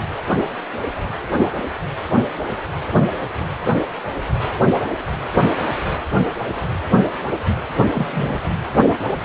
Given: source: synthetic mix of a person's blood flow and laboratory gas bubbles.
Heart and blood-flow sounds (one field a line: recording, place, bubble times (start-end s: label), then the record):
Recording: Doppler ultrasound of blood flow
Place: precordium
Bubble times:
7.95-8.34 s: bubbles
From the record:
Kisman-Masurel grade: 211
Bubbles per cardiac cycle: several, 3 to 8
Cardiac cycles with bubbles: 1 to 10%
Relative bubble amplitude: barely perceptible (0.100 to 0.250)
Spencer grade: 1 (occasional bubble signal discernible with the cardiac motion signal, with majority of cardiac periods free of bubbles)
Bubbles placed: anywhere in the cardiac cycle